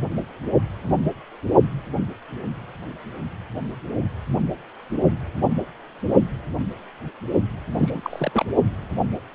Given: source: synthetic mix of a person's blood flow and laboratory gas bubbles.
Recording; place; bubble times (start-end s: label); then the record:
Doppler ultrasound of blood flow; precordium
7.74-8.44 s: bubbles
From the record:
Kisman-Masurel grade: 221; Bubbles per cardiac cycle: several, 3 to 8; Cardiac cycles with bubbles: 10 to 50%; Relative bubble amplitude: barely perceptible (0.100 to 0.250); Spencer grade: 2 (many but less than half of the cardiac periods contain bubble signals, singularly or in groups); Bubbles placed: only in the low amplitude regions of the cardiac cycle